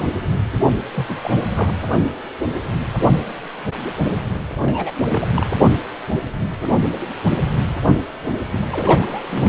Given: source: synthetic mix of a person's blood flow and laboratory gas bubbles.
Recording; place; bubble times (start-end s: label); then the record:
Doppler ultrasound of blood flow; precordium
0.00-0.03 s: bubbles
0.96-1.38 s: bubbles
1.54-1.74 s: bubbles
4.62-4.91 s: bubbles
5.08-5.33 s: bubbles
5.36-5.46 s: bubbles
8.51-8.67 s: bubbles
8.71-9.49 s: bubbles
From the record:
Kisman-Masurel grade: 221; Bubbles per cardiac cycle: several, 3 to 8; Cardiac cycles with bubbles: 10 to 50%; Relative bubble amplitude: barely perceptible (0.100 to 0.250); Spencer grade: 2 (many but less than half of the cardiac periods contain bubble signals, singularly or in groups); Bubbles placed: only in the low amplitude regions of the cardiac cycle